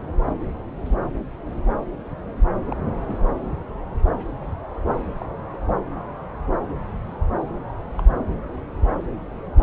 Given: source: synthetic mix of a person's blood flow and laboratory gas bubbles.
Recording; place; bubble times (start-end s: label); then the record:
Doppler ultrasound of blood flow; subclavian vein
0.85-0.95 s: bubbles
2.71-2.75 s: bubbles
3.08-3.31 s: bubbles
5.18-5.25 s: bubbles
5.53-5.57 s: bubbles
7.97-8.03 s: bubbles
From the record:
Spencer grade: 2 (many but less than half of the cardiac periods contain bubble signals, singularly or in groups); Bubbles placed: anywhere in the cardiac cycle